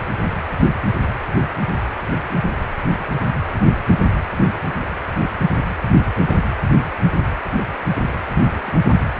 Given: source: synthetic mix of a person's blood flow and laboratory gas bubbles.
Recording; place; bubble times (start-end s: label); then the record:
Doppler ultrasound of blood flow; precordium
4.52-4.62 s: bubbles
6.19-6.40 s: bubbles
8.08-8.16 s: bubbles
8.29-8.77 s: bubbles
8.88-8.94 s: bubbles
From the record:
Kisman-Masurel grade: 121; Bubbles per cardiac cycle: 1 to 2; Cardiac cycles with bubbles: 10 to 50%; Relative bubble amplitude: barely perceptible (0.100 to 0.250); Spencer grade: 2 (many but less than half of the cardiac periods contain bubble signals, singularly or in groups); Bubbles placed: anywhere in the cardiac cycle